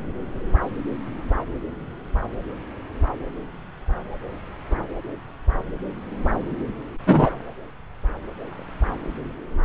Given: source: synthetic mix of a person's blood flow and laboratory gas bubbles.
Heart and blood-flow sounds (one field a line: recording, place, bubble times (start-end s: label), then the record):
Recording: Doppler ultrasound of blood flow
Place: subclavian vein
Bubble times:
7.06-7.30 s: bubbles
From the record:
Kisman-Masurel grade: 123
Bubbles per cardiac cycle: 1 to 2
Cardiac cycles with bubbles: 10 to 50%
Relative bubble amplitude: loud (0.450 to 0.775)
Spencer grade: 2 (many but less than half of the cardiac periods contain bubble signals, singularly or in groups)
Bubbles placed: anywhere in the cardiac cycle